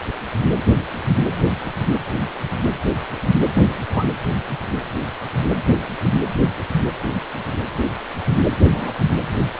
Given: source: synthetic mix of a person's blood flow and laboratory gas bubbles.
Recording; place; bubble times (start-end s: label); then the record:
Doppler ultrasound of blood flow; precordium
3.55-3.62 s: bubbles
3.94-4.04 s: bubbles
8.71-8.91 s: bubbles
From the record:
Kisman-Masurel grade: 112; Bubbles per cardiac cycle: 1 to 2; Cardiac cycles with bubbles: 1 to 10%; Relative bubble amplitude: moderate (0.250 to 0.450); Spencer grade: 1 (occasional bubble signal discernible with the cardiac motion signal, with majority of cardiac periods free of bubbles); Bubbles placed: anywhere in the cardiac cycle